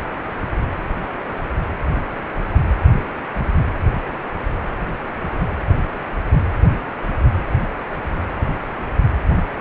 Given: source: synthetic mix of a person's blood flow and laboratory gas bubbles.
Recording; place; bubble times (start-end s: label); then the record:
Doppler ultrasound of blood flow; precordium
no bubbles
From the record:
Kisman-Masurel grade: 000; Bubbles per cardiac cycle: 0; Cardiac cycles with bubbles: 0%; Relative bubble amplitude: no bubbles discernible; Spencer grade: 0 (complete lack of bubble signals)